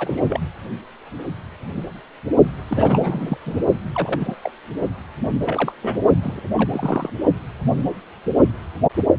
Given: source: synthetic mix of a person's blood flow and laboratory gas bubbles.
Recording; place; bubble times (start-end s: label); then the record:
Doppler ultrasound of blood flow; precordium
0.00-0.21 s: bubbles
0.27-0.40 s: bubbles
2.68-3.37 s: bubbles
3.46-3.59 s: bubbles
3.95-4.36 s: bubbles
4.43-4.51 s: bubbles
5.45-5.72 s: bubbles
5.82-5.98 s: bubbles
6.22-6.41 s: bubbles
6.55-7.10 s: bubbles
From the record:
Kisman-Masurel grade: 232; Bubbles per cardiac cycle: several, 3 to 8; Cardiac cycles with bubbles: 50 to 99%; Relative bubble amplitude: moderate (0.250 to 0.450); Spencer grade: 3 (all of the cardiac periods contain showers or single bubble signals, but not dominating or overriding the cardiac motion signals); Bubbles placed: only in the low amplitude regions of the cardiac cycle